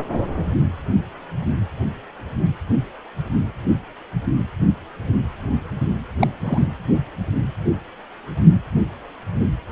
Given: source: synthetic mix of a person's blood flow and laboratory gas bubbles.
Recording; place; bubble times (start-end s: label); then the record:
Doppler ultrasound of blood flow; precordium
6.20-6.27 s: bubbles
6.40-6.68 s: bubbles
From the record:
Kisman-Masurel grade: 112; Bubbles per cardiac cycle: 1 to 2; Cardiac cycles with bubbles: 1 to 10%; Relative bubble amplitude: moderate (0.250 to 0.450); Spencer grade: 1 (occasional bubble signal discernible with the cardiac motion signal, with majority of cardiac periods free of bubbles); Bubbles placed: only in the low amplitude regions of the cardiac cycle